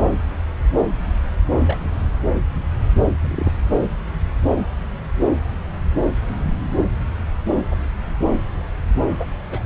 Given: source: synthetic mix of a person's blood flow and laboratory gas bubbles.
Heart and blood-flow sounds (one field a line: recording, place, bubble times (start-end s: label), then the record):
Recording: Doppler ultrasound of blood flow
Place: subclavian vein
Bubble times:
1.46-1.78 s: bubbles
1.80-1.84 s: bubbles
3.21-3.53 s: bubbles
7.55-7.63 s: bubbles
7.71-7.76 s: bubbles
9.18-9.29 s: bubbles
9.46-9.59 s: bubbles
From the record:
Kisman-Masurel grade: 122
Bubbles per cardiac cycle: 1 to 2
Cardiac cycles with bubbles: 10 to 50%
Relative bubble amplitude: moderate (0.250 to 0.450)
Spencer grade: 2 (many but less than half of the cardiac periods contain bubble signals, singularly or in groups)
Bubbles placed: anywhere in the cardiac cycle